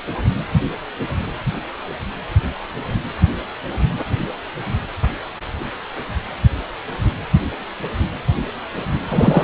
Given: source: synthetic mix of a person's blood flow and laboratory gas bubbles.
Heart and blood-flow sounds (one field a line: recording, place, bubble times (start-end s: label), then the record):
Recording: Doppler ultrasound of blood flow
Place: precordium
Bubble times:
9.08-9.44 s: bubbles
From the record:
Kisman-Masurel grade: 213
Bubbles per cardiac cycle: several, 3 to 8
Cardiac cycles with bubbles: 1 to 10%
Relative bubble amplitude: loud (0.450 to 0.775)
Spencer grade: 1 (occasional bubble signal discernible with the cardiac motion signal, with majority of cardiac periods free of bubbles)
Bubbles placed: anywhere in the cardiac cycle